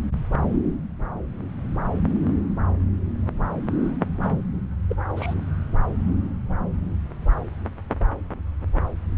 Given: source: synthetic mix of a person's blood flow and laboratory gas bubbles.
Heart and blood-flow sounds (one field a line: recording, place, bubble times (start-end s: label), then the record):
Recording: Doppler ultrasound of blood flow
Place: subclavian vein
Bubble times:
4.23-4.32 s: bubbles
4.89-4.96 s: bubbles
5.16-5.35 s: bubbles
From the record:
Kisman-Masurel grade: 211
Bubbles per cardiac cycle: several, 3 to 8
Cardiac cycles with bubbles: 1 to 10%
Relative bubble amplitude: barely perceptible (0.100 to 0.250)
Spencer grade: 1 (occasional bubble signal discernible with the cardiac motion signal, with majority of cardiac periods free of bubbles)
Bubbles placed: anywhere in the cardiac cycle